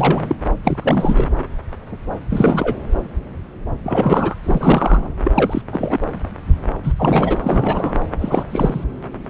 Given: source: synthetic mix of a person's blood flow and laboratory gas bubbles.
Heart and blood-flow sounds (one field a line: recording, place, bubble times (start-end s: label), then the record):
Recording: Doppler ultrasound of blood flow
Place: subclavian vein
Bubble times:
0.00-0.36 s: bubbles
0.63-0.77 s: bubbles
0.80-1.27 s: bubbles
2.30-2.76 s: bubbles
3.84-4.35 s: bubbles
4.43-5.09 s: bubbles
5.23-5.61 s: bubbles
5.71-5.98 s: bubbles
6.83-6.93 s: bubbles
6.96-7.93 s: bubbles
8.21-8.44 s: bubbles
8.49-8.84 s: bubbles
From the record:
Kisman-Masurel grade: 333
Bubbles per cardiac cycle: rolling drumbeat, 9 or more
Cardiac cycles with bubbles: 50 to 99%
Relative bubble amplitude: loud (0.450 to 0.775)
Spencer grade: 3 (all of the cardiac periods contain showers or single bubble signals, but not dominating or overriding the cardiac motion signals)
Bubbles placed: anywhere in the cardiac cycle